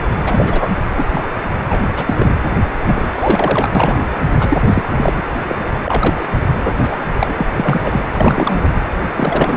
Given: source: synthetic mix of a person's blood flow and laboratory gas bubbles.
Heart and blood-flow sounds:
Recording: Doppler ultrasound of blood flow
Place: precordium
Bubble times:
0.23-0.71 s: bubbles
0.97-1.06 s: bubbles
1.10-1.28 s: bubbles
1.68-1.85 s: bubbles
1.96-2.36 s: bubbles
2.85-3.72 s: bubbles
3.75-4.18 s: bubbles
4.39-4.58 s: bubbles
4.65-4.83 s: bubbles
4.97-5.12 s: bubbles
5.17-5.23 s: bubbles
5.49-5.56 s: bubbles
5.83-6.29 s: bubbles
6.64-6.72 s: bubbles
6.81-7.03 s: bubbles
7.19-7.36 s: bubbles
7.38-7.46 s: bubbles
7.51-8.00 s: bubbles
8.12-8.60 s: bubbles
9.15-9.57 s: bubbles
From the record:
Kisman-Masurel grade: 242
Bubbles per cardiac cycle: several, 3 to 8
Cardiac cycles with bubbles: 100%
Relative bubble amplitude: moderate (0.250 to 0.450)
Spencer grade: 3 (all of the cardiac periods contain showers or single bubble signals, but not dominating or overriding the cardiac motion signals)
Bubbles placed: anywhere in the cardiac cycle

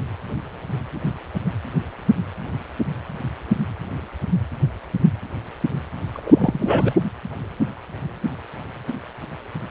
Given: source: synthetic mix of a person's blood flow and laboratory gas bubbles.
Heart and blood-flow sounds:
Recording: Doppler ultrasound of blood flow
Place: precordium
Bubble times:
6.14-7.01 s: bubbles
From the record:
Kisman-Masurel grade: 212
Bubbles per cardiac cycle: several, 3 to 8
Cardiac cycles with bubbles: 1 to 10%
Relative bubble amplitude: moderate (0.250 to 0.450)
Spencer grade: 1 (occasional bubble signal discernible with the cardiac motion signal, with majority of cardiac periods free of bubbles)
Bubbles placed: anywhere in the cardiac cycle

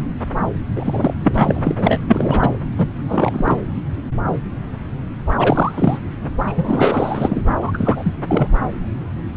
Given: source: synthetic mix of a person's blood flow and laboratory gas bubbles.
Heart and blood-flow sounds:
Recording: Doppler ultrasound of blood flow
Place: subclavian vein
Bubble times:
0.76-1.14 s: bubbles
1.24-1.74 s: bubbles
1.78-2.00 s: bubbles
2.07-2.58 s: bubbles
2.78-2.88 s: bubbles
3.08-3.56 s: bubbles
5.39-5.98 s: bubbles
6.46-7.44 s: bubbles
7.60-7.71 s: bubbles
7.73-8.17 s: bubbles
8.27-8.47 s: bubbles
From the record:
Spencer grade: 3 (all of the cardiac periods contain showers or single bubble signals, but not dominating or overriding the cardiac motion signals)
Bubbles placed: anywhere in the cardiac cycle

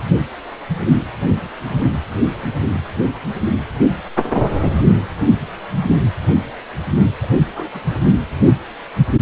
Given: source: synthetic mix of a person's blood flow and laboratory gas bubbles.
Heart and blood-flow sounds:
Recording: Doppler ultrasound of blood flow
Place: precordium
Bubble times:
7.21-7.29 s: bubbles
7.55-7.69 s: bubbles
7.73-7.81 s: bubbles
7.88-8.08 s: bubbles
From the record:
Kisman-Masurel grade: 211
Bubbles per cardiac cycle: several, 3 to 8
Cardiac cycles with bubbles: 1 to 10%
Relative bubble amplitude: barely perceptible (0.100 to 0.250)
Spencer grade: 1 (occasional bubble signal discernible with the cardiac motion signal, with majority of cardiac periods free of bubbles)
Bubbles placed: anywhere in the cardiac cycle

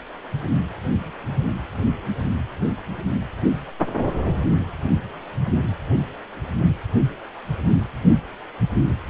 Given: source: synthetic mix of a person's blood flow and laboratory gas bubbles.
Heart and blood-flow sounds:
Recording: Doppler ultrasound of blood flow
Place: precordium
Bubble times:
no bubbles
From the record:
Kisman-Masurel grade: 000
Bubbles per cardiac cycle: 0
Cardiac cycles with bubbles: 0%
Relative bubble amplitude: no bubbles discernible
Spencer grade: 0 (complete lack of bubble signals)

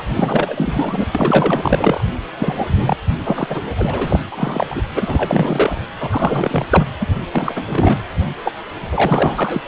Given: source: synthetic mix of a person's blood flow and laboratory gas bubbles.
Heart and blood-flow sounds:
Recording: Doppler ultrasound of blood flow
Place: precordium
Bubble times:
0.00-0.02 s: bubbles
0.07-1.06 s: bubbles
1.15-2.04 s: bubbles
2.39-2.97 s: bubbles
3.24-3.47 s: bubbles
3.50-3.62 s: bubbles
3.77-4.21 s: bubbles
4.31-4.82 s: bubbles
4.94-5.78 s: bubbles
6.00-6.64 s: bubbles
6.69-6.86 s: bubbles
7.00-7.06 s: bubbles
7.32-7.99 s: bubbles
8.45-8.53 s: bubbles
8.91-9.62 s: bubbles
From the record:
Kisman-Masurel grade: 343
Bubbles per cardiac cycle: rolling drumbeat, 9 or more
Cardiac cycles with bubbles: 100%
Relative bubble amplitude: loud (0.450 to 0.775)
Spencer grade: 3 (all of the cardiac periods contain showers or single bubble signals, but not dominating or overriding the cardiac motion signals)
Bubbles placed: anywhere in the cardiac cycle

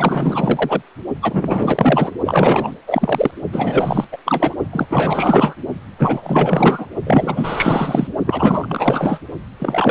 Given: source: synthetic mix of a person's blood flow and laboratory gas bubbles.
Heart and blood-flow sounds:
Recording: Doppler ultrasound of blood flow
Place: precordium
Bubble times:
0.00-0.82 s: bubbles
1.21-2.12 s: bubbles
2.25-2.76 s: bubbles
2.87-3.31 s: bubbles
3.52-4.04 s: bubbles
4.12-4.17 s: bubbles
4.25-4.54 s: bubbles
4.72-4.88 s: bubbles
4.90-5.54 s: bubbles
5.98-6.86 s: bubbles
7.04-8.07 s: bubbles
8.26-9.18 s: bubbles
9.59-9.91 s: bubbles
From the record:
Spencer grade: 4 (maximum detectable bubble signal sounding continuously throughout systole and diastole of every cardiac period, and overriding the amplitude of the normal cardiac signals)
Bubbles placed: only in the low amplitude regions of the cardiac cycle

